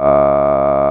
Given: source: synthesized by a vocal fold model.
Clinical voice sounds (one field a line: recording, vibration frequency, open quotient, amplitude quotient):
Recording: sustained vowel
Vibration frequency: 70 Hz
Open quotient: 0.2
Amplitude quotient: 1.4